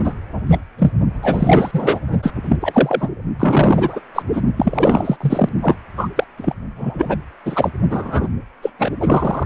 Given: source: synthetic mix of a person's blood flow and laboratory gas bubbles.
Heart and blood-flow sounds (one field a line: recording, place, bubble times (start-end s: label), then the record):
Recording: Doppler ultrasound of blood flow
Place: precordium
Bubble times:
0.04-0.15 s: bubbles
0.47-0.57 s: bubbles
0.78-0.91 s: bubbles
1.22-2.00 s: bubbles
2.23-2.31 s: bubbles
2.44-2.56 s: bubbles
2.60-3.09 s: bubbles
3.40-4.00 s: bubbles
4.14-4.22 s: bubbles
4.32-4.42 s: bubbles
4.57-5.16 s: bubbles
5.20-5.49 s: bubbles
5.61-5.75 s: bubbles
5.97-6.07 s: bubbles
6.15-6.24 s: bubbles
6.37-6.54 s: bubbles
6.75-7.17 s: bubbles
7.45-7.70 s: bubbles
7.90-8.28 s: bubbles
8.62-8.70 s: bubbles
8.79-8.92 s: bubbles
9.00-9.46 s: bubbles
From the record:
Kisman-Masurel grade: 243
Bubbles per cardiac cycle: several, 3 to 8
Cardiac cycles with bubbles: 100%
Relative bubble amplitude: loud (0.450 to 0.775)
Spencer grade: 3 (all of the cardiac periods contain showers or single bubble signals, but not dominating or overriding the cardiac motion signals)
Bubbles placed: only in the low amplitude regions of the cardiac cycle